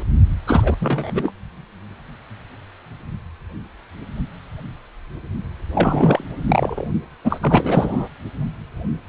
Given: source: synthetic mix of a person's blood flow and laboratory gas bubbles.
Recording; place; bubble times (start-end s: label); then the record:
Doppler ultrasound of blood flow; precordium
0.00-0.03 s: bubbles
0.46-1.31 s: bubbles
5.73-6.25 s: bubbles
6.47-6.86 s: bubbles
7.24-8.08 s: bubbles
From the record:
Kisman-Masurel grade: 333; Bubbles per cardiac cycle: rolling drumbeat, 9 or more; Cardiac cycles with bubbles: 50 to 99%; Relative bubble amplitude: loud (0.450 to 0.775); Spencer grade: 3 (all of the cardiac periods contain showers or single bubble signals, but not dominating or overriding the cardiac motion signals); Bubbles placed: only in the low amplitude regions of the cardiac cycle